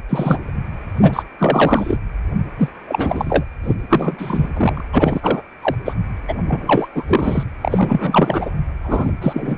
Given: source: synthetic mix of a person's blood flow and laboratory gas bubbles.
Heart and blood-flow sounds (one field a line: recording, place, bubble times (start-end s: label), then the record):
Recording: Doppler ultrasound of blood flow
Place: precordium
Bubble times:
0.09-0.52 s: bubbles
0.97-1.23 s: bubbles
1.39-1.98 s: bubbles
2.58-2.69 s: bubbles
2.88-3.44 s: bubbles
3.63-3.74 s: bubbles
3.89-4.47 s: bubbles
4.53-4.84 s: bubbles
4.92-5.42 s: bubbles
5.61-5.75 s: bubbles
5.85-5.93 s: bubbles
6.28-6.35 s: bubbles
6.46-6.88 s: bubbles
6.94-7.03 s: bubbles
7.07-7.43 s: bubbles
7.61-8.50 s: bubbles
8.83-9.13 s: bubbles
9.21-9.58 s: bubbles
From the record:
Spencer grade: 3 (all of the cardiac periods contain showers or single bubble signals, but not dominating or overriding the cardiac motion signals)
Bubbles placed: anywhere in the cardiac cycle